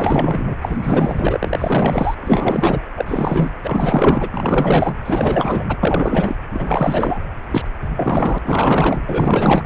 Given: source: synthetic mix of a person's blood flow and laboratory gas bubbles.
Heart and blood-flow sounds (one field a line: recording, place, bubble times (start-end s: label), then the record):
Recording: Doppler ultrasound of blood flow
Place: precordium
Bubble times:
0.00-0.56 s: bubbles
0.61-2.15 s: bubbles
2.21-2.83 s: bubbles
2.96-3.50 s: bubbles
3.64-4.29 s: bubbles
4.32-4.93 s: bubbles
5.04-5.64 s: bubbles
5.68-5.78 s: bubbles
5.83-6.35 s: bubbles
6.53-7.20 s: bubbles
7.50-7.68 s: bubbles
7.96-8.38 s: bubbles
8.43-9.62 s: bubbles
From the record:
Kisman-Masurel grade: 444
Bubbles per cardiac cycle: continuous sound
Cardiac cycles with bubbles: 100%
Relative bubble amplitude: maximal (0.775 to 0.999)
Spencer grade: 4 (maximum detectable bubble signal sounding continuously throughout systole and diastole of every cardiac period, and overriding the amplitude of the normal cardiac signals)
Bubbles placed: anywhere in the cardiac cycle